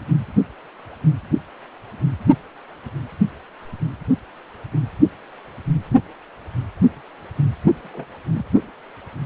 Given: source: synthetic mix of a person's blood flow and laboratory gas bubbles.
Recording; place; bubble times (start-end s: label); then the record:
Doppler ultrasound of blood flow; precordium
7.84-7.90 s: bubbles
7.93-8.05 s: bubbles
8.34-8.46 s: bubbles
From the record:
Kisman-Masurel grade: 111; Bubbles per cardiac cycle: 1 to 2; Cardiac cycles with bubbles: 1 to 10%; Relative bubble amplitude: barely perceptible (0.100 to 0.250); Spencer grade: 1 (occasional bubble signal discernible with the cardiac motion signal, with majority of cardiac periods free of bubbles); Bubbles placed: anywhere in the cardiac cycle